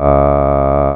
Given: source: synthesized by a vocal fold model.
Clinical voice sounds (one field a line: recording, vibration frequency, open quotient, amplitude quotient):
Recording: sustained vowel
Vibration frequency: 70 Hz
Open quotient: 0.5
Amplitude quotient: 1.3